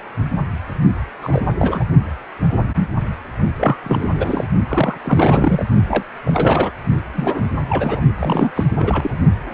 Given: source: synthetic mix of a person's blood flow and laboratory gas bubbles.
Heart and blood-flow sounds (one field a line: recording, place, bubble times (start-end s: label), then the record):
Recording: Doppler ultrasound of blood flow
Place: precordium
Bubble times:
1.22-1.45 s: bubbles
1.52-1.85 s: bubbles
3.57-3.78 s: bubbles
3.83-4.45 s: bubbles
4.68-4.97 s: bubbles
5.04-5.65 s: bubbles
5.87-6.02 s: bubbles
6.23-6.71 s: bubbles
7.13-7.50 s: bubbles
7.69-8.04 s: bubbles
8.17-8.52 s: bubbles
8.55-8.65 s: bubbles
8.79-9.11 s: bubbles
From the record:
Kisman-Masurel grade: 332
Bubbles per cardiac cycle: rolling drumbeat, 9 or more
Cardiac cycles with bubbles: 50 to 99%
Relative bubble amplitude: moderate (0.250 to 0.450)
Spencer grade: 3 (all of the cardiac periods contain showers or single bubble signals, but not dominating or overriding the cardiac motion signals)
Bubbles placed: only in the low amplitude regions of the cardiac cycle